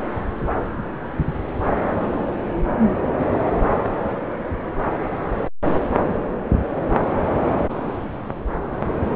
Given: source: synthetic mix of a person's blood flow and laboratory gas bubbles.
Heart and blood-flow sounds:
Doppler ultrasound of blood flow; subclavian vein
no bubbles
From the record:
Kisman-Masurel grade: 000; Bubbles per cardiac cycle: 0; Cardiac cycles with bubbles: 0%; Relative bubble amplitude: no bubbles discernible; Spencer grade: 0 (complete lack of bubble signals)

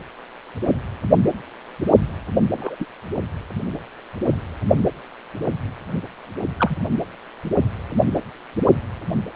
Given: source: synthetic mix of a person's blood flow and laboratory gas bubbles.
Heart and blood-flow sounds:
Doppler ultrasound of blood flow; precordium
2.52-2.75 s: bubbles
2.79-2.85 s: bubbles
6.58-6.76 s: bubbles
From the record:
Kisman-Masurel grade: 122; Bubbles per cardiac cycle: 1 to 2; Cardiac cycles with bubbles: 10 to 50%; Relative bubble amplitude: moderate (0.250 to 0.450); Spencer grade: 2 (many but less than half of the cardiac periods contain bubble signals, singularly or in groups); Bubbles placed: anywhere in the cardiac cycle

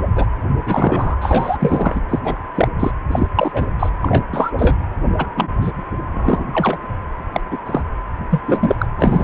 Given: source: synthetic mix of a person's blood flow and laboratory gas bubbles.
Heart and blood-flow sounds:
Doppler ultrasound of blood flow; precordium
0.00-0.03 s: bubbles
0.15-0.25 s: bubbles
0.66-1.16 s: bubbles
1.20-2.00 s: bubbles
2.08-2.19 s: bubbles
2.23-2.35 s: bubbles
2.55-2.69 s: bubbles
2.79-2.91 s: bubbles
3.11-3.27 s: bubbles
3.35-3.67 s: bubbles
3.79-3.90 s: bubbles
4.02-4.24 s: bubbles
4.32-4.51 s: bubbles
4.58-4.75 s: bubbles
5.18-5.27 s: bubbles
5.37-5.50 s: bubbles
5.62-5.72 s: bubbles
6.14-6.45 s: bubbles
6.53-6.78 s: bubbles
7.33-7.41 s: bubbles
7.51-7.58 s: bubbles
7.66-7.82 s: bubbles
8.30-8.40 s: bubbles
8.46-8.75 s: bubbles
8.78-8.87 s: bubbles
8.97-9.24 s: bubbles
From the record:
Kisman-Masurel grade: 233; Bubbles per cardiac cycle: several, 3 to 8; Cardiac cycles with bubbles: 50 to 99%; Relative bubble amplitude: loud (0.450 to 0.775); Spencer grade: 3 (all of the cardiac periods contain showers or single bubble signals, but not dominating or overriding the cardiac motion signals); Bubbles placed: anywhere in the cardiac cycle

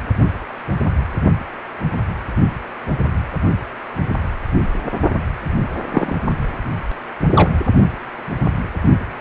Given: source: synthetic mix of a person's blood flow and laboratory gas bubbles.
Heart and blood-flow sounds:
Doppler ultrasound of blood flow; precordium
5.91-6.18 s: bubbles
7.33-7.58 s: bubbles
From the record:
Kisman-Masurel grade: 123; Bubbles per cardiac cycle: 1 to 2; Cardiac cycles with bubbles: 10 to 50%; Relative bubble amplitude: loud (0.450 to 0.775); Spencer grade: 2 (many but less than half of the cardiac periods contain bubble signals, singularly or in groups); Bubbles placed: only in the low amplitude regions of the cardiac cycle

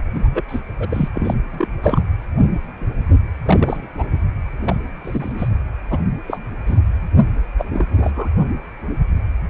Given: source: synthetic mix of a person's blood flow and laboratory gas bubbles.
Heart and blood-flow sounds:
Doppler ultrasound of blood flow; precordium
0.00-0.02 s: bubbles
0.13-0.42 s: bubbles
0.48-0.60 s: bubbles
0.79-1.09 s: bubbles
1.15-1.34 s: bubbles
1.52-1.67 s: bubbles
1.82-2.02 s: bubbles
3.45-3.87 s: bubbles
3.98-4.08 s: bubbles
4.65-4.76 s: bubbles
5.04-5.32 s: bubbles
5.38-5.50 s: bubbles
5.90-5.98 s: bubbles
6.28-6.39 s: bubbles
6.66-6.79 s: bubbles
7.58-7.65 s: bubbles
7.73-8.29 s: bubbles
From the record:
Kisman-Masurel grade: 232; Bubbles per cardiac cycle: several, 3 to 8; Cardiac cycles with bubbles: 50 to 99%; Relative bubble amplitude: moderate (0.250 to 0.450); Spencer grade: 3 (all of the cardiac periods contain showers or single bubble signals, but not dominating or overriding the cardiac motion signals); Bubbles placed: anywhere in the cardiac cycle

